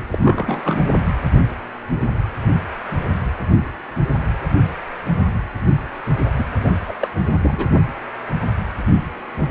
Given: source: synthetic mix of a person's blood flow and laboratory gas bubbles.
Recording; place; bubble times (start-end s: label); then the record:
Doppler ultrasound of blood flow; precordium
0.10-0.79 s: bubbles
6.39-6.45 s: bubbles
6.59-6.69 s: bubbles
6.88-6.95 s: bubbles
7.01-7.08 s: bubbles
7.42-7.67 s: bubbles
From the record:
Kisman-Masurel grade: 222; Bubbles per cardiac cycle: several, 3 to 8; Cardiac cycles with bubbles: 10 to 50%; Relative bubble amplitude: moderate (0.250 to 0.450); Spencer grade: 2 (many but less than half of the cardiac periods contain bubble signals, singularly or in groups); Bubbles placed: anywhere in the cardiac cycle